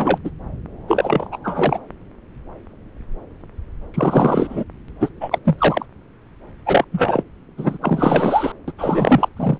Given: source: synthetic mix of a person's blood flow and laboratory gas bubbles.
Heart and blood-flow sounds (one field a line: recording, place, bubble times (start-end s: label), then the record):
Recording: Doppler ultrasound of blood flow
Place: subclavian vein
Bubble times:
0.00-0.21 s: bubbles
0.24-0.30 s: bubbles
0.88-1.28 s: bubbles
1.31-1.38 s: bubbles
1.44-1.79 s: bubbles
3.94-4.64 s: bubbles
5.00-5.09 s: bubbles
5.20-5.38 s: bubbles
5.44-5.85 s: bubbles
6.66-6.84 s: bubbles
6.92-7.22 s: bubbles
7.56-7.78 s: bubbles
7.81-8.52 s: bubbles
8.68-8.72 s: bubbles
8.78-9.29 s: bubbles
9.37-9.58 s: bubbles
From the record:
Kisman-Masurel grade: 233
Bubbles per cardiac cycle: several, 3 to 8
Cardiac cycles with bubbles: 50 to 99%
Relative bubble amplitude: loud (0.450 to 0.775)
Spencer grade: 3 (all of the cardiac periods contain showers or single bubble signals, but not dominating or overriding the cardiac motion signals)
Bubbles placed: anywhere in the cardiac cycle